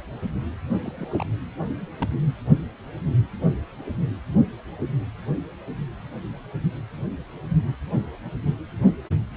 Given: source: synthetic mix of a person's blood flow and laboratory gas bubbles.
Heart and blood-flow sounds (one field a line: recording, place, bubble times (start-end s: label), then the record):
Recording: Doppler ultrasound of blood flow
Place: precordium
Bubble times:
0.83-1.06 s: bubbles
1.13-1.24 s: bubbles
1.59-1.65 s: bubbles
2.01-2.08 s: bubbles
From the record:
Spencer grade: 1 (occasional bubble signal discernible with the cardiac motion signal, with majority of cardiac periods free of bubbles)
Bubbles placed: only in the low amplitude regions of the cardiac cycle